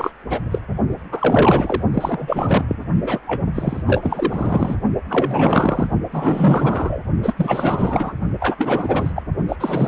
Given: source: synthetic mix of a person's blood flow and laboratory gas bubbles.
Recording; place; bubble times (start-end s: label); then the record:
Doppler ultrasound of blood flow; precordium
0.00-0.12 s: bubbles
0.29-0.41 s: bubbles
0.51-0.59 s: bubbles
1.11-1.83 s: bubbles
1.94-2.65 s: bubbles
2.67-2.77 s: bubbles
3.02-3.21 s: bubbles
3.27-3.45 s: bubbles
3.54-3.83 s: bubbles
3.86-4.76 s: bubbles
5.09-5.90 s: bubbles
6.11-7.01 s: bubbles
7.22-7.34 s: bubbles
7.37-8.13 s: bubbles
8.39-9.13 s: bubbles
9.15-9.22 s: bubbles
9.48-9.56 s: bubbles
9.60-9.88 s: bubbles
From the record:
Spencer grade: 4 (maximum detectable bubble signal sounding continuously throughout systole and diastole of every cardiac period, and overriding the amplitude of the normal cardiac signals); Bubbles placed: only in the low amplitude regions of the cardiac cycle